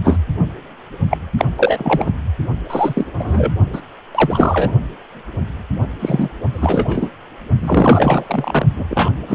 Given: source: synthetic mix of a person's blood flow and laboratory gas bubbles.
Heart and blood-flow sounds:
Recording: Doppler ultrasound of blood flow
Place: precordium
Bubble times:
0.04-0.17 s: bubbles
1.09-1.18 s: bubbles
1.38-1.45 s: bubbles
1.56-2.12 s: bubbles
2.70-3.06 s: bubbles
3.18-3.52 s: bubbles
3.72-3.82 s: bubbles
4.15-4.72 s: bubbles
6.00-6.32 s: bubbles
6.53-7.11 s: bubbles
7.59-8.65 s: bubbles
8.75-8.84 s: bubbles
8.89-9.10 s: bubbles
9.28-9.35 s: bubbles
From the record:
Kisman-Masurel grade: 233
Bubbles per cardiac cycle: several, 3 to 8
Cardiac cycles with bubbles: 50 to 99%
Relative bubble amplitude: loud (0.450 to 0.775)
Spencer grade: 3 (all of the cardiac periods contain showers or single bubble signals, but not dominating or overriding the cardiac motion signals)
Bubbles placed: only in the low amplitude regions of the cardiac cycle

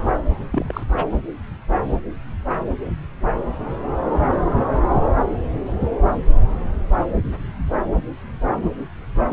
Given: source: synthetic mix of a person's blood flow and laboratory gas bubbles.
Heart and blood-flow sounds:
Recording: Doppler ultrasound of blood flow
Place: subclavian vein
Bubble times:
0.52-0.83 s: bubbles
0.97-1.04 s: bubbles
From the record:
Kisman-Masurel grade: 222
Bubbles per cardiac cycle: several, 3 to 8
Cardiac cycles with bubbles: 10 to 50%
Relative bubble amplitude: moderate (0.250 to 0.450)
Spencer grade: 2 (many but less than half of the cardiac periods contain bubble signals, singularly or in groups)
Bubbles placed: anywhere in the cardiac cycle

